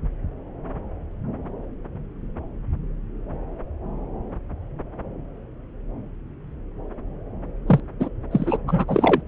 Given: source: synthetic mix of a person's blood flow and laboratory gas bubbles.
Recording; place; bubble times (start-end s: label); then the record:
Doppler ultrasound of blood flow; subclavian vein
7.68-7.80 s: bubbles
8.00-8.09 s: bubbles
8.31-8.58 s: bubbles
8.67-9.21 s: bubbles
From the record:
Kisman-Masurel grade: 222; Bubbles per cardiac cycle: several, 3 to 8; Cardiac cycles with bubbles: 10 to 50%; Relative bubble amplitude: moderate (0.250 to 0.450); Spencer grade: 2 (many but less than half of the cardiac periods contain bubble signals, singularly or in groups); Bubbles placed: anywhere in the cardiac cycle